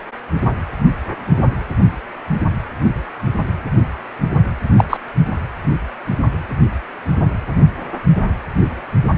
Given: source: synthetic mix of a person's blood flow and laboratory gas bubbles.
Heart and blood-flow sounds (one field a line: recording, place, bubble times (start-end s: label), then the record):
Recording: Doppler ultrasound of blood flow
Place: precordium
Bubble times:
4.77-4.84 s: bubbles
4.89-4.97 s: bubbles
From the record:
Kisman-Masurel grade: 113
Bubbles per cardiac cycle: 1 to 2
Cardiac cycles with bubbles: 1 to 10%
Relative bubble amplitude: loud (0.450 to 0.775)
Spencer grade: 1 (occasional bubble signal discernible with the cardiac motion signal, with majority of cardiac periods free of bubbles)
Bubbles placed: anywhere in the cardiac cycle